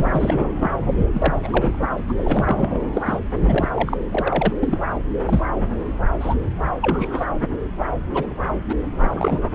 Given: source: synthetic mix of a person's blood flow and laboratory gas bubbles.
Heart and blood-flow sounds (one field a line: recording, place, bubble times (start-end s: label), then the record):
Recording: Doppler ultrasound of blood flow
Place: subclavian vein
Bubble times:
0.00-0.69 s: bubbles
0.96-1.04 s: bubbles
1.12-1.79 s: bubbles
1.81-1.88 s: bubbles
2.08-2.12 s: bubbles
2.18-2.79 s: bubbles
2.93-3.02 s: bubbles
3.04-3.20 s: bubbles
3.36-3.70 s: bubbles
3.74-3.97 s: bubbles
4.11-4.53 s: bubbles
4.60-4.78 s: bubbles
5.25-5.41 s: bubbles
6.19-6.35 s: bubbles
6.81-7.25 s: bubbles
7.78-7.86 s: bubbles
8.12-8.27 s: bubbles
8.69-8.76 s: bubbles
8.99-9.49 s: bubbles
From the record:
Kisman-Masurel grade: 232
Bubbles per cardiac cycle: several, 3 to 8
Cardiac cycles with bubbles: 50 to 99%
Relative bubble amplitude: moderate (0.250 to 0.450)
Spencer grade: 3 (all of the cardiac periods contain showers or single bubble signals, but not dominating or overriding the cardiac motion signals)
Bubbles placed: anywhere in the cardiac cycle